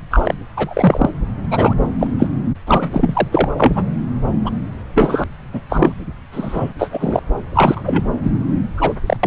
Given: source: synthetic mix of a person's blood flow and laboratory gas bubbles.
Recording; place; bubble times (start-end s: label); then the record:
Doppler ultrasound of blood flow; subclavian vein
0.11-0.35 s: bubbles
0.56-1.09 s: bubbles
1.51-1.74 s: bubbles
1.99-2.07 s: bubbles
2.19-2.27 s: bubbles
2.66-3.27 s: bubbles
3.32-3.49 s: bubbles
3.57-3.83 s: bubbles
4.44-4.50 s: bubbles
4.95-5.24 s: bubbles
5.52-5.60 s: bubbles
5.70-5.96 s: bubbles
6.32-6.72 s: bubbles
6.78-7.20 s: bubbles
7.50-7.82 s: bubbles
7.86-8.04 s: bubbles
8.23-8.30 s: bubbles
8.77-8.93 s: bubbles
9.06-9.16 s: bubbles
9.23-9.27 s: bubbles
From the record:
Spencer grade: 3 (all of the cardiac periods contain showers or single bubble signals, but not dominating or overriding the cardiac motion signals); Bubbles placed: anywhere in the cardiac cycle